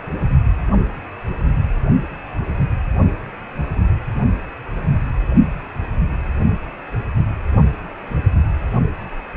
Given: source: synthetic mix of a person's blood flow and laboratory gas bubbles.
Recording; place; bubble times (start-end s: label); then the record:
Doppler ultrasound of blood flow; precordium
no bubbles
From the record:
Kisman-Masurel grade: 000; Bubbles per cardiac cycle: 0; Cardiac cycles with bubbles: 0%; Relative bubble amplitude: no bubbles discernible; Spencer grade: 0 (complete lack of bubble signals)